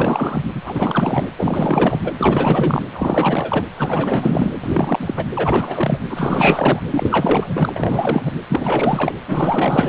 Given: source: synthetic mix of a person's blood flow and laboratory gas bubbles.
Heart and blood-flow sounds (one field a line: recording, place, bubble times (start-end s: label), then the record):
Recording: Doppler ultrasound of blood flow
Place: precordium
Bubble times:
0.00-0.43 s: bubbles
0.55-1.27 s: bubbles
1.38-2.01 s: bubbles
2.03-2.13 s: bubbles
2.17-2.82 s: bubbles
2.92-3.66 s: bubbles
3.77-4.53 s: bubbles
4.63-5.26 s: bubbles
5.35-6.01 s: bubbles
6.10-6.83 s: bubbles
6.91-7.70 s: bubbles
7.75-8.33 s: bubbles
8.49-9.14 s: bubbles
9.27-9.89 s: bubbles
From the record:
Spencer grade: 4 (maximum detectable bubble signal sounding continuously throughout systole and diastole of every cardiac period, and overriding the amplitude of the normal cardiac signals)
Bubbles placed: anywhere in the cardiac cycle